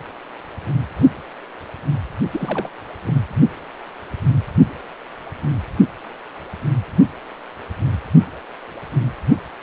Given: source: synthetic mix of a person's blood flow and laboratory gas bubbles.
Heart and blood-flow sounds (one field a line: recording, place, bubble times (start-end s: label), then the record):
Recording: Doppler ultrasound of blood flow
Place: precordium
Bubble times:
2.31-2.71 s: bubbles
3.04-3.15 s: bubbles
From the record:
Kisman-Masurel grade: 211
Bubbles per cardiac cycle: several, 3 to 8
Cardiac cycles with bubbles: 1 to 10%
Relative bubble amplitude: barely perceptible (0.100 to 0.250)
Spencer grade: 1 (occasional bubble signal discernible with the cardiac motion signal, with majority of cardiac periods free of bubbles)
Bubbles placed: only in the low amplitude regions of the cardiac cycle